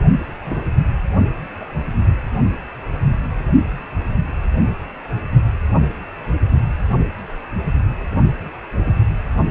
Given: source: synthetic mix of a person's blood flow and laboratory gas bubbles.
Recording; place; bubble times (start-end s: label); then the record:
Doppler ultrasound of blood flow; precordium
0.45-0.63 s: bubbles
1.60-1.64 s: bubbles
From the record:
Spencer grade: 2 (many but less than half of the cardiac periods contain bubble signals, singularly or in groups); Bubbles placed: only in the low amplitude regions of the cardiac cycle